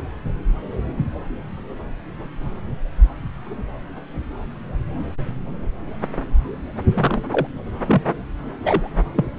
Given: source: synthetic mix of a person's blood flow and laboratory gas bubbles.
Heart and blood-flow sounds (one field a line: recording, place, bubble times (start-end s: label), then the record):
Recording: Doppler ultrasound of blood flow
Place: subclavian vein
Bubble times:
6.94-7.22 s: bubbles
7.31-7.47 s: bubbles
7.86-8.02 s: bubbles
8.63-8.89 s: bubbles
9.17-9.26 s: bubbles
From the record:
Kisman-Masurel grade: 222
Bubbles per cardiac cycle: several, 3 to 8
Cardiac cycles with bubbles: 10 to 50%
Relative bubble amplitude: moderate (0.250 to 0.450)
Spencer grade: 2 (many but less than half of the cardiac periods contain bubble signals, singularly or in groups)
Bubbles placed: anywhere in the cardiac cycle